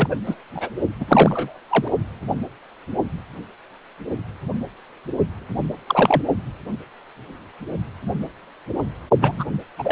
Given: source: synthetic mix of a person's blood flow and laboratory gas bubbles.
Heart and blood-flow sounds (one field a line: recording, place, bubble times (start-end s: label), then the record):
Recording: Doppler ultrasound of blood flow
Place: precordium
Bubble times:
0.00-0.17 s: bubbles
0.26-0.35 s: bubbles
0.55-0.71 s: bubbles
1.00-1.05 s: bubbles
1.08-1.59 s: bubbles
1.70-1.88 s: bubbles
5.87-6.22 s: bubbles
9.21-9.44 s: bubbles
9.53-9.62 s: bubbles
9.78-9.92 s: bubbles
From the record:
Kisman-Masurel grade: 223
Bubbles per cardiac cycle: several, 3 to 8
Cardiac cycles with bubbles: 10 to 50%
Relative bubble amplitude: loud (0.450 to 0.775)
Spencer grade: 2 (many but less than half of the cardiac periods contain bubble signals, singularly or in groups)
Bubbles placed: only in the low amplitude regions of the cardiac cycle